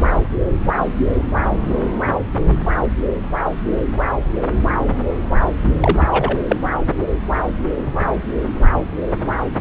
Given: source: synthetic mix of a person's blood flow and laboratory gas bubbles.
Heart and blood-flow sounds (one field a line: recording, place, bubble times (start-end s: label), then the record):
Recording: Doppler ultrasound of blood flow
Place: subclavian vein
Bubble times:
5.80-6.07 s: bubbles
6.10-6.39 s: bubbles
6.49-6.57 s: bubbles
From the record:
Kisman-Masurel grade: 213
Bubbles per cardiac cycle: several, 3 to 8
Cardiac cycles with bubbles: 1 to 10%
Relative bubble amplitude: loud (0.450 to 0.775)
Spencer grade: 1 (occasional bubble signal discernible with the cardiac motion signal, with majority of cardiac periods free of bubbles)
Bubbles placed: anywhere in the cardiac cycle